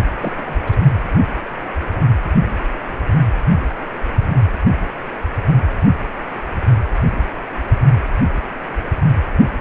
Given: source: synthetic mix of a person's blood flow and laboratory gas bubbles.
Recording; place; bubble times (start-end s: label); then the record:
Doppler ultrasound of blood flow; precordium
0.19-0.33 s: bubbles
0.35-0.59 s: bubbles
0.65-0.80 s: bubbles
From the record:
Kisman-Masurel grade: 211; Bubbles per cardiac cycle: several, 3 to 8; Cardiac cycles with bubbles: 1 to 10%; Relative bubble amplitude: barely perceptible (0.100 to 0.250); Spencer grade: 1 (occasional bubble signal discernible with the cardiac motion signal, with majority of cardiac periods free of bubbles); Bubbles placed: anywhere in the cardiac cycle